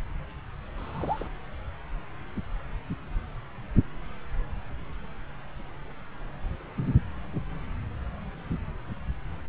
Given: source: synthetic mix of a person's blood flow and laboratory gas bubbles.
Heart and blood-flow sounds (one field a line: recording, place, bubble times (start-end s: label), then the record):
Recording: Doppler ultrasound of blood flow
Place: subclavian vein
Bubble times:
0.78-1.27 s: bubbles
From the record:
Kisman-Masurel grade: 111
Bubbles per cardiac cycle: 1 to 2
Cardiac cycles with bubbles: 1 to 10%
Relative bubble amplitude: barely perceptible (0.100 to 0.250)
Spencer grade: 1 (occasional bubble signal discernible with the cardiac motion signal, with majority of cardiac periods free of bubbles)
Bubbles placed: anywhere in the cardiac cycle